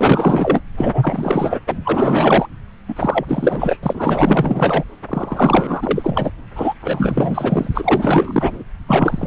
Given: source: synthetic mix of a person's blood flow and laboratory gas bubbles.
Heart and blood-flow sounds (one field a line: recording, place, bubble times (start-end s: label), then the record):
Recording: Doppler ultrasound of blood flow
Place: subclavian vein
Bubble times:
0.00-0.60 s: bubbles
0.78-1.59 s: bubbles
1.67-1.79 s: bubbles
1.84-2.46 s: bubbles
2.88-3.78 s: bubbles
3.82-4.83 s: bubbles
5.08-6.31 s: bubbles
6.55-6.73 s: bubbles
6.81-7.69 s: bubbles
7.71-8.63 s: bubbles
8.88-9.27 s: bubbles
From the record:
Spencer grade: 4 (maximum detectable bubble signal sounding continuously throughout systole and diastole of every cardiac period, and overriding the amplitude of the normal cardiac signals)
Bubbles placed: anywhere in the cardiac cycle